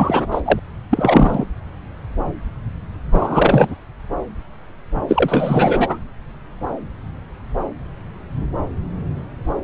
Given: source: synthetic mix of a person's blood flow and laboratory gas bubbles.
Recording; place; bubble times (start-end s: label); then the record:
Doppler ultrasound of blood flow; subclavian vein
0.00-0.27 s: bubbles
0.31-0.42 s: bubbles
0.45-0.60 s: bubbles
0.90-1.45 s: bubbles
3.12-3.75 s: bubbles
5.08-5.98 s: bubbles
From the record:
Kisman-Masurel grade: 223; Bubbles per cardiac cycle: several, 3 to 8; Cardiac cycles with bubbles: 10 to 50%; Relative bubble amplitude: loud (0.450 to 0.775); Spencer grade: 2 (many but less than half of the cardiac periods contain bubble signals, singularly or in groups); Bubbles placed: anywhere in the cardiac cycle